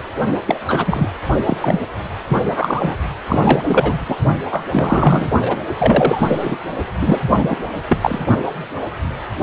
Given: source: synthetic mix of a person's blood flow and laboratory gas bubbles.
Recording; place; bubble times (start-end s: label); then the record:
Doppler ultrasound of blood flow; precordium
0.47-0.59 s: bubbles
0.67-1.11 s: bubbles
1.46-1.57 s: bubbles
1.61-1.80 s: bubbles
2.28-2.96 s: bubbles
3.27-3.61 s: bubbles
3.63-4.17 s: bubbles
4.50-4.66 s: bubbles
4.71-5.31 s: bubbles
5.42-5.57 s: bubbles
5.78-6.58 s: bubbles
7.01-7.18 s: bubbles
7.25-7.58 s: bubbles
7.89-7.99 s: bubbles
8.01-8.19 s: bubbles
From the record:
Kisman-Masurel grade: 333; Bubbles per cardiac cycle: rolling drumbeat, 9 or more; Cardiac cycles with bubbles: 50 to 99%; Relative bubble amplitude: loud (0.450 to 0.775); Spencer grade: 3 (all of the cardiac periods contain showers or single bubble signals, but not dominating or overriding the cardiac motion signals); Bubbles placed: only in the low amplitude regions of the cardiac cycle